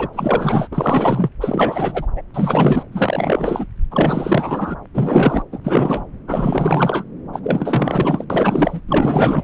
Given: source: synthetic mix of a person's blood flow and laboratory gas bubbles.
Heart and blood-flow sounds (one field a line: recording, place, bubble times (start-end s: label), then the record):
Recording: Doppler ultrasound of blood flow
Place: subclavian vein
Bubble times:
0.00-0.08 s: bubbles
0.12-0.68 s: bubbles
0.71-1.30 s: bubbles
1.41-2.06 s: bubbles
2.16-2.23 s: bubbles
2.34-2.83 s: bubbles
2.92-3.65 s: bubbles
3.90-4.76 s: bubbles
4.94-5.42 s: bubbles
5.52-5.59 s: bubbles
5.63-6.04 s: bubbles
6.27-7.04 s: bubbles
7.32-7.40 s: bubbles
7.43-8.25 s: bubbles
8.30-8.80 s: bubbles
8.88-9.44 s: bubbles
From the record:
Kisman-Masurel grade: 444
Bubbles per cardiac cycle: continuous sound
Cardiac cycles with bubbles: 100%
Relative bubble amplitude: maximal (0.775 to 0.999)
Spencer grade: 4 (maximum detectable bubble signal sounding continuously throughout systole and diastole of every cardiac period, and overriding the amplitude of the normal cardiac signals)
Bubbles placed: anywhere in the cardiac cycle